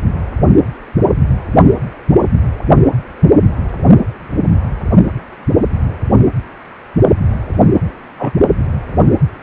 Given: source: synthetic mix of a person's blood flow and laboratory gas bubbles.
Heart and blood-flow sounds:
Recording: Doppler ultrasound of blood flow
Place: precordium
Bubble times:
8.19-8.32 s: bubbles
From the record:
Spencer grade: 1 (occasional bubble signal discernible with the cardiac motion signal, with majority of cardiac periods free of bubbles)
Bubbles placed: only in the low amplitude regions of the cardiac cycle

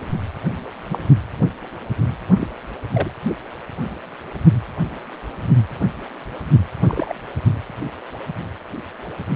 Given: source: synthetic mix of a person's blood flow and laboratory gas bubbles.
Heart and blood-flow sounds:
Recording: Doppler ultrasound of blood flow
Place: precordium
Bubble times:
0.90-0.98 s: bubbles
2.40-2.48 s: bubbles
2.93-3.11 s: bubbles
6.88-7.13 s: bubbles
From the record:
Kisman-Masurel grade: 122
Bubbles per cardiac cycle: 1 to 2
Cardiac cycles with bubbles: 10 to 50%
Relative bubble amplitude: moderate (0.250 to 0.450)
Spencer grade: 2 (many but less than half of the cardiac periods contain bubble signals, singularly or in groups)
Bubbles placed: only in the low amplitude regions of the cardiac cycle

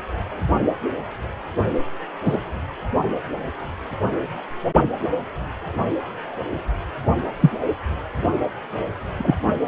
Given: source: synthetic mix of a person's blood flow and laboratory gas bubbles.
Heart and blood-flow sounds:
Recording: Doppler ultrasound of blood flow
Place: precordium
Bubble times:
2.25-2.38 s: bubbles
7.40-7.50 s: bubbles
9.18-9.35 s: bubbles
From the record:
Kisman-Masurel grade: 123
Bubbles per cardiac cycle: 1 to 2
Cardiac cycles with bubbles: 10 to 50%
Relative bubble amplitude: loud (0.450 to 0.775)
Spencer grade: 2 (many but less than half of the cardiac periods contain bubble signals, singularly or in groups)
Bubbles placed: only in the low amplitude regions of the cardiac cycle

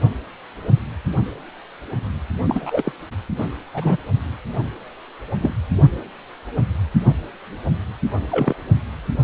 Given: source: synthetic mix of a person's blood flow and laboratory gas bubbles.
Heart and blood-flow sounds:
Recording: Doppler ultrasound of blood flow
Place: precordium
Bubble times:
2.48-2.92 s: bubbles
3.38-3.48 s: bubbles
3.74-3.97 s: bubbles
5.41-5.54 s: bubbles
7.01-7.11 s: bubbles
8.31-8.54 s: bubbles
From the record:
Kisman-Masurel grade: 123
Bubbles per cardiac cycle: 1 to 2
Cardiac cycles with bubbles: 10 to 50%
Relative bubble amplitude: loud (0.450 to 0.775)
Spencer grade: 2 (many but less than half of the cardiac periods contain bubble signals, singularly or in groups)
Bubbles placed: anywhere in the cardiac cycle

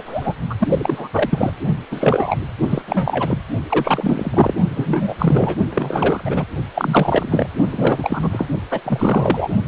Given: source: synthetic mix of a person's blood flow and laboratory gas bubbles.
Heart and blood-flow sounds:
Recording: Doppler ultrasound of blood flow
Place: precordium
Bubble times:
0.00-0.34 s: bubbles
0.49-0.55 s: bubbles
0.59-1.08 s: bubbles
1.13-1.52 s: bubbles
1.91-2.37 s: bubbles
2.67-2.81 s: bubbles
2.88-3.38 s: bubbles
3.69-4.54 s: bubbles
4.75-5.15 s: bubbles
5.19-5.57 s: bubbles
5.69-6.23 s: bubbles
6.25-6.46 s: bubbles
6.74-7.47 s: bubbles
7.72-8.46 s: bubbles
8.70-8.81 s: bubbles
8.85-9.49 s: bubbles
From the record:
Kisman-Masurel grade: 343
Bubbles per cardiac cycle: rolling drumbeat, 9 or more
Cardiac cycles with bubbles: 100%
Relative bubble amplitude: loud (0.450 to 0.775)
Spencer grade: 3 (all of the cardiac periods contain showers or single bubble signals, but not dominating or overriding the cardiac motion signals)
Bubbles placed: only in the low amplitude regions of the cardiac cycle

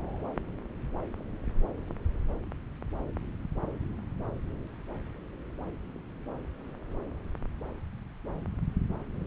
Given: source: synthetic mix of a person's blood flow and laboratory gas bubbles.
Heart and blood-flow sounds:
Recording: Doppler ultrasound of blood flow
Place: subclavian vein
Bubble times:
no bubbles
From the record:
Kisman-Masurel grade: 000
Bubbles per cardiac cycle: 0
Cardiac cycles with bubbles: 0%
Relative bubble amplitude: no bubbles discernible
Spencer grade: 0 (complete lack of bubble signals)

